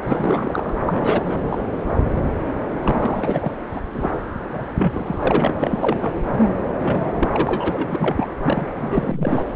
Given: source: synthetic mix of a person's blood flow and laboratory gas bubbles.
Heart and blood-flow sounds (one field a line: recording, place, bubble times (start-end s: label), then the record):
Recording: Doppler ultrasound of blood flow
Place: subclavian vein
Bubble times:
0.02-0.73 s: bubbles
0.85-1.58 s: bubbles
2.16-2.20 s: bubbles
2.82-3.53 s: bubbles
3.62-3.65 s: bubbles
3.73-3.82 s: bubbles
3.94-4.19 s: bubbles
4.52-4.65 s: bubbles
4.77-5.53 s: bubbles
5.59-6.14 s: bubbles
6.32-6.48 s: bubbles
6.82-7.11 s: bubbles
7.16-7.29 s: bubbles
7.32-8.28 s: bubbles
8.43-8.67 s: bubbles
8.79-9.46 s: bubbles
From the record:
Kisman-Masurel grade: 342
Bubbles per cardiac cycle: rolling drumbeat, 9 or more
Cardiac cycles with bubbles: 100%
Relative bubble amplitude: moderate (0.250 to 0.450)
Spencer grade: 3 (all of the cardiac periods contain showers or single bubble signals, but not dominating or overriding the cardiac motion signals)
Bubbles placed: anywhere in the cardiac cycle